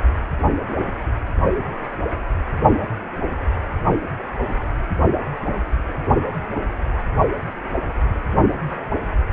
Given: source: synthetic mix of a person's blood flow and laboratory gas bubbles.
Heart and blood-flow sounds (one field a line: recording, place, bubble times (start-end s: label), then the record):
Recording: Doppler ultrasound of blood flow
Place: precordium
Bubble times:
no bubbles
From the record:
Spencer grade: 0 (complete lack of bubble signals)